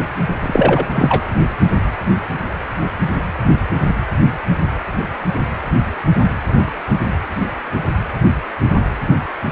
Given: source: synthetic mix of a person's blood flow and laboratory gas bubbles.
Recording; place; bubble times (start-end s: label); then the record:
Doppler ultrasound of blood flow; precordium
0.40-0.86 s: bubbles
0.94-1.23 s: bubbles
From the record:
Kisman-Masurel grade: 213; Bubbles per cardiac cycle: several, 3 to 8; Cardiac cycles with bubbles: 1 to 10%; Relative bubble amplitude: loud (0.450 to 0.775); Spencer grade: 1 (occasional bubble signal discernible with the cardiac motion signal, with majority of cardiac periods free of bubbles); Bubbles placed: anywhere in the cardiac cycle